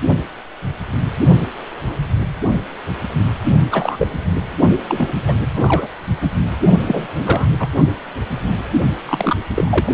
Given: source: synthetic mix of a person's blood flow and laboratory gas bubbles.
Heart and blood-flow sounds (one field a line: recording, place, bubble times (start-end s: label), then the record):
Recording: Doppler ultrasound of blood flow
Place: precordium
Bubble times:
3.71-4.08 s: bubbles
4.89-5.08 s: bubbles
5.27-5.33 s: bubbles
5.56-5.88 s: bubbles
6.22-6.30 s: bubbles
6.87-7.07 s: bubbles
7.19-7.49 s: bubbles
7.59-7.69 s: bubbles
9.05-9.37 s: bubbles
9.54-9.93 s: bubbles
From the record:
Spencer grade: 3 (all of the cardiac periods contain showers or single bubble signals, but not dominating or overriding the cardiac motion signals)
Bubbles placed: only in the low amplitude regions of the cardiac cycle